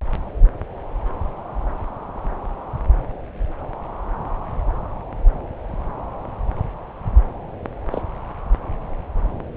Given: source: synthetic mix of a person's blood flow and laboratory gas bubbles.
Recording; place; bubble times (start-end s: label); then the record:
Doppler ultrasound of blood flow; subclavian vein
7.90-8.02 s: bubbles
From the record:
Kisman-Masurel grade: 112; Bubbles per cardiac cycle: 1 to 2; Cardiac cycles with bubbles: 1 to 10%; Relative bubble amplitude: moderate (0.250 to 0.450); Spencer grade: 1 (occasional bubble signal discernible with the cardiac motion signal, with majority of cardiac periods free of bubbles); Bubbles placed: anywhere in the cardiac cycle